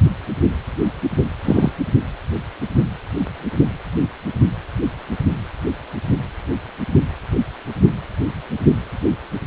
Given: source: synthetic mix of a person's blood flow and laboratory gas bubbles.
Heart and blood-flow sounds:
Doppler ultrasound of blood flow; precordium
1.44-1.72 s: bubbles
From the record:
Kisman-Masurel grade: 113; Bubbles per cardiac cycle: 1 to 2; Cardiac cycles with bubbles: 1 to 10%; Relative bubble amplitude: loud (0.450 to 0.775); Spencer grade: 1 (occasional bubble signal discernible with the cardiac motion signal, with majority of cardiac periods free of bubbles); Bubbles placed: only in the low amplitude regions of the cardiac cycle

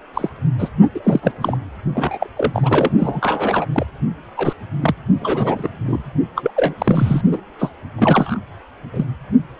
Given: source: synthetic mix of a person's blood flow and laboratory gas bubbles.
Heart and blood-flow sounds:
Doppler ultrasound of blood flow; precordium
0.13-0.29 s: bubbles
0.59-0.70 s: bubbles
0.94-1.00 s: bubbles
1.04-1.33 s: bubbles
1.41-1.57 s: bubbles
1.94-2.27 s: bubbles
2.36-2.91 s: bubbles
2.98-3.67 s: bubbles
3.73-3.86 s: bubbles
4.37-4.53 s: bubbles
4.82-4.95 s: bubbles
5.19-5.70 s: bubbles
5.86-6.02 s: bubbles
6.36-6.50 s: bubbles
6.56-6.74 s: bubbles
6.78-7.22 s: bubbles
7.31-7.42 s: bubbles
7.58-7.71 s: bubbles
7.97-8.39 s: bubbles
8.93-9.05 s: bubbles
From the record:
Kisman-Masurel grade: 243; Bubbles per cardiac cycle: several, 3 to 8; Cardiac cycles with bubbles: 100%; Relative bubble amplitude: loud (0.450 to 0.775); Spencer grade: 3 (all of the cardiac periods contain showers or single bubble signals, but not dominating or overriding the cardiac motion signals); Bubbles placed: only in the low amplitude regions of the cardiac cycle

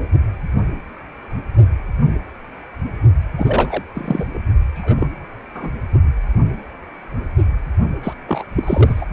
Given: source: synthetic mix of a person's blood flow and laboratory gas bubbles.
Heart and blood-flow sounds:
Doppler ultrasound of blood flow; precordium
0.00-0.09 s: bubbles
3.37-3.83 s: bubbles
3.94-4.25 s: bubbles
4.33-4.38 s: bubbles
4.75-5.08 s: bubbles
5.54-5.70 s: bubbles
8.03-8.14 s: bubbles
8.28-8.44 s: bubbles
8.56-9.06 s: bubbles
From the record:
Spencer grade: 3 (all of the cardiac periods contain showers or single bubble signals, but not dominating or overriding the cardiac motion signals); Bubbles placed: anywhere in the cardiac cycle

